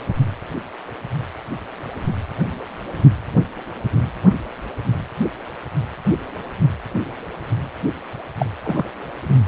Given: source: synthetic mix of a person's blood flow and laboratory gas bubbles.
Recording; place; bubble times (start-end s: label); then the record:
Doppler ultrasound of blood flow; precordium
8.39-8.46 s: bubbles
8.63-8.85 s: bubbles
From the record:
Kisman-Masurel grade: 112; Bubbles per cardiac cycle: 1 to 2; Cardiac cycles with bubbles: 1 to 10%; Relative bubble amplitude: moderate (0.250 to 0.450); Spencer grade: 1 (occasional bubble signal discernible with the cardiac motion signal, with majority of cardiac periods free of bubbles); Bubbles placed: anywhere in the cardiac cycle